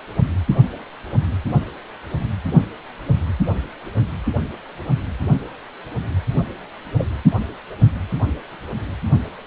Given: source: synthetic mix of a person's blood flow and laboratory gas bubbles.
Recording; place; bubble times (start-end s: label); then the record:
Doppler ultrasound of blood flow; precordium
6.97-7.06 s: bubbles
From the record:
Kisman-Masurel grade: 111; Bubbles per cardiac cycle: 1 to 2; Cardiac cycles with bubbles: 1 to 10%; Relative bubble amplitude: barely perceptible (0.100 to 0.250); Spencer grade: 1 (occasional bubble signal discernible with the cardiac motion signal, with majority of cardiac periods free of bubbles); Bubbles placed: anywhere in the cardiac cycle